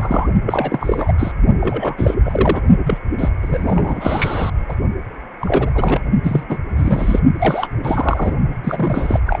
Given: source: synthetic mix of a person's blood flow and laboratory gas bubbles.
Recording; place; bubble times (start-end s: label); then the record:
Doppler ultrasound of blood flow; precordium
0.00-0.28 s: bubbles
0.45-1.12 s: bubbles
1.18-1.31 s: bubbles
1.60-2.16 s: bubbles
2.25-2.62 s: bubbles
2.85-2.98 s: bubbles
3.18-3.29 s: bubbles
3.42-4.50 s: bubbles
4.68-4.75 s: bubbles
5.40-6.00 s: bubbles
6.22-6.43 s: bubbles
6.49-6.57 s: bubbles
6.75-7.19 s: bubbles
7.39-7.67 s: bubbles
7.82-8.32 s: bubbles
8.63-9.20 s: bubbles
9.26-9.40 s: bubbles
From the record:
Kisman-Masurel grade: 342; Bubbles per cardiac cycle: rolling drumbeat, 9 or more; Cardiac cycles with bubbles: 100%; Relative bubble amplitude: moderate (0.250 to 0.450); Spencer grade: 3 (all of the cardiac periods contain showers or single bubble signals, but not dominating or overriding the cardiac motion signals); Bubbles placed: only in the low amplitude regions of the cardiac cycle